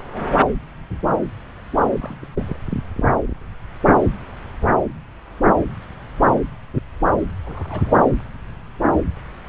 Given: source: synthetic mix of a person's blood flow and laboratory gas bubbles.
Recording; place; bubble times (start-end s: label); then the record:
Doppler ultrasound of blood flow; subclavian vein
0.13-0.26 s: bubbles
1.99-2.25 s: bubbles
2.39-2.57 s: bubbles
7.44-7.93 s: bubbles
From the record:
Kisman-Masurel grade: 121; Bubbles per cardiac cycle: 1 to 2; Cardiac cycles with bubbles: 10 to 50%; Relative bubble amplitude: barely perceptible (0.100 to 0.250); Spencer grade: 2 (many but less than half of the cardiac periods contain bubble signals, singularly or in groups); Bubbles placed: anywhere in the cardiac cycle